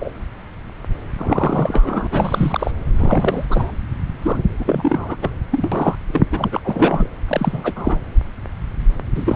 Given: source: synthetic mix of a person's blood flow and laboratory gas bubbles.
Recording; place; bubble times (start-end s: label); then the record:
Doppler ultrasound of blood flow; subclavian vein
0.00-0.12 s: bubbles
1.18-2.07 s: bubbles
2.10-2.71 s: bubbles
2.96-3.46 s: bubbles
3.50-3.71 s: bubbles
4.22-4.42 s: bubbles
4.59-5.16 s: bubbles
5.21-5.30 s: bubbles
5.51-5.95 s: bubbles
6.12-6.25 s: bubbles
6.32-6.61 s: bubbles
6.65-7.09 s: bubbles
7.28-8.00 s: bubbles
9.14-9.36 s: bubbles
From the record:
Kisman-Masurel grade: 332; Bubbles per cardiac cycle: rolling drumbeat, 9 or more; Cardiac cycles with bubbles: 50 to 99%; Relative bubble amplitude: moderate (0.250 to 0.450); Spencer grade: 3 (all of the cardiac periods contain showers or single bubble signals, but not dominating or overriding the cardiac motion signals); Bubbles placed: anywhere in the cardiac cycle